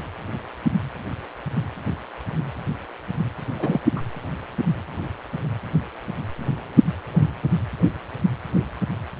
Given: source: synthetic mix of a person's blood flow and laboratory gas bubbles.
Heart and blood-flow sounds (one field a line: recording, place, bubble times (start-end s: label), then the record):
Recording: Doppler ultrasound of blood flow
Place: precordium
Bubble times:
3.53-3.80 s: bubbles
3.95-4.01 s: bubbles
From the record:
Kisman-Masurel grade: 211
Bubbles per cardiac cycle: several, 3 to 8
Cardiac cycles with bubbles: 1 to 10%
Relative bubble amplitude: barely perceptible (0.100 to 0.250)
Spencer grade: 1 (occasional bubble signal discernible with the cardiac motion signal, with majority of cardiac periods free of bubbles)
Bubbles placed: anywhere in the cardiac cycle